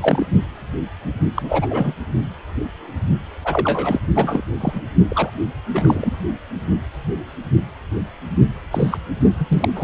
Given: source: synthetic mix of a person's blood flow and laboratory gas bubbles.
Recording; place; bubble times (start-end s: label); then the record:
Doppler ultrasound of blood flow; precordium
0.00-0.27 s: bubbles
1.34-1.67 s: bubbles
1.70-1.93 s: bubbles
3.45-4.00 s: bubbles
4.15-4.42 s: bubbles
4.60-4.82 s: bubbles
5.08-5.30 s: bubbles
5.73-6.13 s: bubbles
8.71-8.97 s: bubbles
9.39-9.46 s: bubbles
9.48-9.69 s: bubbles
9.75-9.84 s: bubbles
From the record:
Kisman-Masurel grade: 232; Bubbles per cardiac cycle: several, 3 to 8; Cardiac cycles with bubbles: 50 to 99%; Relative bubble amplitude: moderate (0.250 to 0.450); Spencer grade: 3 (all of the cardiac periods contain showers or single bubble signals, but not dominating or overriding the cardiac motion signals); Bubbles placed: only in the low amplitude regions of the cardiac cycle